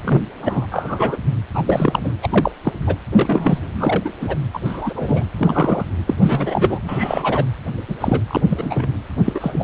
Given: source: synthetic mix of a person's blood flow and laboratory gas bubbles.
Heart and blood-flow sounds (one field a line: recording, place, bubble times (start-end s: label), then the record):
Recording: Doppler ultrasound of blood flow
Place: precordium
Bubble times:
0.04-0.22 s: bubbles
0.42-0.67 s: bubbles
0.71-1.17 s: bubbles
1.54-1.63 s: bubbles
1.65-2.12 s: bubbles
2.22-2.51 s: bubbles
2.65-2.73 s: bubbles
2.87-2.96 s: bubbles
3.10-3.59 s: bubbles
3.77-4.12 s: bubbles
4.21-4.37 s: bubbles
4.53-4.59 s: bubbles
4.65-5.28 s: bubbles
5.37-5.85 s: bubbles
6.07-6.14 s: bubbles
6.21-6.80 s: bubbles
6.84-7.46 s: bubbles
7.88-7.95 s: bubbles
8.00-8.21 s: bubbles
8.27-8.41 s: bubbles
8.49-8.88 s: bubbles
9.25-9.64 s: bubbles
From the record:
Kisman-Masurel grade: 243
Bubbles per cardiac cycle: several, 3 to 8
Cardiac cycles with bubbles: 100%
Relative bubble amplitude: loud (0.450 to 0.775)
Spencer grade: 3 (all of the cardiac periods contain showers or single bubble signals, but not dominating or overriding the cardiac motion signals)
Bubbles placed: anywhere in the cardiac cycle